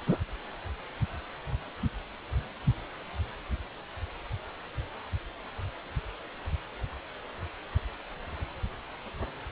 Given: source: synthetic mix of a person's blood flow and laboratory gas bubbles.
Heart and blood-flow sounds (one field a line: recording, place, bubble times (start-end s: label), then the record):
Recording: Doppler ultrasound of blood flow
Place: precordium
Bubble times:
0.07-0.18 s: bubbles
From the record:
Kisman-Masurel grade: 112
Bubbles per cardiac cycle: 1 to 2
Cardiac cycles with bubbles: 1 to 10%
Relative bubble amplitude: moderate (0.250 to 0.450)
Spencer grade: 1 (occasional bubble signal discernible with the cardiac motion signal, with majority of cardiac periods free of bubbles)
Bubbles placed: anywhere in the cardiac cycle